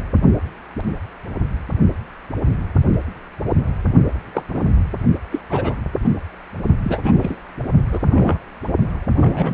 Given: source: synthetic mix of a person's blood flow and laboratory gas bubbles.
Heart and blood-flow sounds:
Doppler ultrasound of blood flow; precordium
4.34-4.42 s: bubbles
4.50-4.62 s: bubbles
5.31-5.40 s: bubbles
5.49-5.76 s: bubbles
6.01-6.10 s: bubbles
6.83-6.99 s: bubbles
7.03-7.35 s: bubbles
7.92-8.39 s: bubbles
9.20-9.54 s: bubbles
From the record:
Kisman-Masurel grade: 232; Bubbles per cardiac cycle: several, 3 to 8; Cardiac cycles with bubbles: 50 to 99%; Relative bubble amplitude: moderate (0.250 to 0.450); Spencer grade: 3 (all of the cardiac periods contain showers or single bubble signals, but not dominating or overriding the cardiac motion signals); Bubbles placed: only in the low amplitude regions of the cardiac cycle

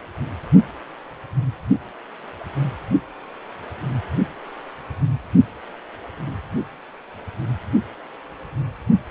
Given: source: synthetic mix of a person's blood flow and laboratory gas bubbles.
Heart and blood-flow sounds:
Doppler ultrasound of blood flow; precordium
no bubbles
From the record:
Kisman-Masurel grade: 000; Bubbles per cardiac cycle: 0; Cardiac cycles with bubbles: 0%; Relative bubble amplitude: no bubbles discernible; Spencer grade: 0 (complete lack of bubble signals)

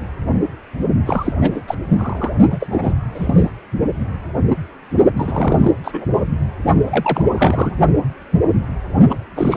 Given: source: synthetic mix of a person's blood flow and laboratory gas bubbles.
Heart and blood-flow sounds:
Doppler ultrasound of blood flow; precordium
1.06-1.32 s: bubbles
1.41-1.51 s: bubbles
1.54-1.62 s: bubbles
1.67-1.75 s: bubbles
1.98-2.31 s: bubbles
2.50-2.94 s: bubbles
3.14-3.50 s: bubbles
5.17-5.71 s: bubbles
5.84-6.05 s: bubbles
6.13-6.21 s: bubbles
6.86-7.22 s: bubbles
7.38-7.75 s: bubbles
9.09-9.19 s: bubbles
9.36-9.56 s: bubbles
From the record:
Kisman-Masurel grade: 332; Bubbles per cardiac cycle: rolling drumbeat, 9 or more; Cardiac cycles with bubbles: 50 to 99%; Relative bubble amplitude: moderate (0.250 to 0.450); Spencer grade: 3 (all of the cardiac periods contain showers or single bubble signals, but not dominating or overriding the cardiac motion signals); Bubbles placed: only in the low amplitude regions of the cardiac cycle

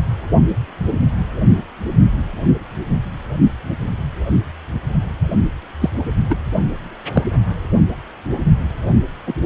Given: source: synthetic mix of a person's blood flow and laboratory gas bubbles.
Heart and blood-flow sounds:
Doppler ultrasound of blood flow; precordium
5.81-5.90 s: bubbles
6.29-6.36 s: bubbles
7.15-7.23 s: bubbles
9.27-9.35 s: bubbles
From the record:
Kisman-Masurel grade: 123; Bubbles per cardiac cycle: 1 to 2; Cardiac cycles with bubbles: 10 to 50%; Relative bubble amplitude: loud (0.450 to 0.775); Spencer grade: 2 (many but less than half of the cardiac periods contain bubble signals, singularly or in groups); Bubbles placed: only in the low amplitude regions of the cardiac cycle

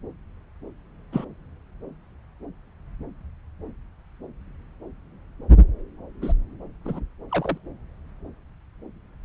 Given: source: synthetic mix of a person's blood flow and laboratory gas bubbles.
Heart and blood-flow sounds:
Doppler ultrasound of blood flow; subclavian vein
1.12-1.25 s: bubbles
6.21-6.33 s: bubbles
6.84-7.00 s: bubbles
7.31-7.58 s: bubbles
From the record:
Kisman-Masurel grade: 122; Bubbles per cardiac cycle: 1 to 2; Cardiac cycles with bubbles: 10 to 50%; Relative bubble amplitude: moderate (0.250 to 0.450); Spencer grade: 2 (many but less than half of the cardiac periods contain bubble signals, singularly or in groups); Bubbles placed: anywhere in the cardiac cycle

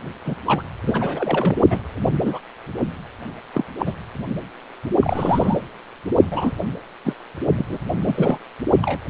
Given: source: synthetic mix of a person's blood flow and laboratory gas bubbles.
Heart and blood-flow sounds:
Doppler ultrasound of blood flow; precordium
0.24-0.35 s: bubbles
0.46-0.64 s: bubbles
0.86-1.57 s: bubbles
1.70-1.79 s: bubbles
2.12-2.39 s: bubbles
3.54-3.65 s: bubbles
3.78-3.93 s: bubbles
5.00-5.61 s: bubbles
6.30-6.51 s: bubbles
7.04-7.13 s: bubbles
7.58-7.65 s: bubbles
7.69-7.78 s: bubbles
8.06-8.38 s: bubbles
8.81-8.98 s: bubbles
From the record:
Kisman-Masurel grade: 242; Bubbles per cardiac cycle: several, 3 to 8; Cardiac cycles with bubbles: 100%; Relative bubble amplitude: moderate (0.250 to 0.450); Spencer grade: 3 (all of the cardiac periods contain showers or single bubble signals, but not dominating or overriding the cardiac motion signals); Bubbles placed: only in the low amplitude regions of the cardiac cycle

